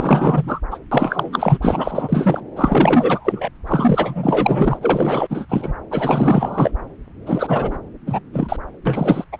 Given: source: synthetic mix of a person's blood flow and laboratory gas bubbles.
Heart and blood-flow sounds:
Doppler ultrasound of blood flow; subclavian vein
0.00-0.60 s: bubbles
0.71-0.79 s: bubbles
0.91-1.57 s: bubbles
1.61-2.42 s: bubbles
2.56-3.50 s: bubbles
3.67-4.79 s: bubbles
4.81-5.46 s: bubbles
5.49-5.72 s: bubbles
5.90-6.71 s: bubbles
7.26-7.78 s: bubbles
8.06-8.20 s: bubbles
8.32-8.56 s: bubbles
8.85-9.24 s: bubbles
9.32-9.40 s: bubbles
From the record:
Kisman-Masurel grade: 444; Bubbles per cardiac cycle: continuous sound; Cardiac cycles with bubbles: 100%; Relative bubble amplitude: maximal (0.775 to 0.999); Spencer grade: 4 (maximum detectable bubble signal sounding continuously throughout systole and diastole of every cardiac period, and overriding the amplitude of the normal cardiac signals); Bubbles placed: anywhere in the cardiac cycle

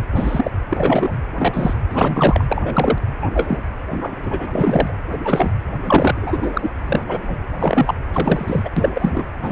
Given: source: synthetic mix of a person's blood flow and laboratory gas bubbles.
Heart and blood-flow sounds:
Doppler ultrasound of blood flow; precordium
0.15-0.51 s: bubbles
0.69-1.18 s: bubbles
1.35-1.73 s: bubbles
1.90-2.44 s: bubbles
2.48-2.98 s: bubbles
3.21-3.31 s: bubbles
3.34-3.58 s: bubbles
3.89-4.17 s: bubbles
4.22-4.46 s: bubbles
4.50-4.93 s: bubbles
5.12-5.18 s: bubbles
5.25-5.51 s: bubbles
5.84-6.70 s: bubbles
6.87-7.20 s: bubbles
7.26-7.37 s: bubbles
7.55-7.95 s: bubbles
8.12-8.70 s: bubbles
8.77-9.25 s: bubbles
9.42-9.52 s: bubbles
From the record:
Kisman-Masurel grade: 243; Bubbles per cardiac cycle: several, 3 to 8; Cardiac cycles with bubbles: 100%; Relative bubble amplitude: loud (0.450 to 0.775); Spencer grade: 3 (all of the cardiac periods contain showers or single bubble signals, but not dominating or overriding the cardiac motion signals); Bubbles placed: anywhere in the cardiac cycle

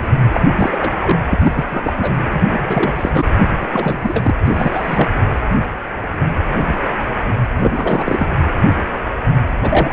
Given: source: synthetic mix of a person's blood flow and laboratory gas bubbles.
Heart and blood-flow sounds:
Doppler ultrasound of blood flow; precordium
0.32-0.40 s: bubbles
0.55-1.20 s: bubbles
1.30-1.65 s: bubbles
1.70-2.16 s: bubbles
2.32-3.25 s: bubbles
3.61-3.67 s: bubbles
3.70-4.35 s: bubbles
4.45-5.10 s: bubbles
7.49-8.28 s: bubbles
9.62-9.93 s: bubbles
From the record:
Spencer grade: 3 (all of the cardiac periods contain showers or single bubble signals, but not dominating or overriding the cardiac motion signals); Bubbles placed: anywhere in the cardiac cycle

